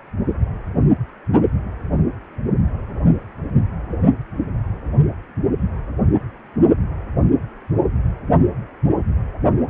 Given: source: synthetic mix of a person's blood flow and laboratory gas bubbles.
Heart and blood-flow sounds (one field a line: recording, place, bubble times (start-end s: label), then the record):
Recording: Doppler ultrasound of blood flow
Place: precordium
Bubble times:
no bubbles
From the record:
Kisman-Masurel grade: 000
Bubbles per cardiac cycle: 0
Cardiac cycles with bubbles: 0%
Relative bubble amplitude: no bubbles discernible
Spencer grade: 0 (complete lack of bubble signals)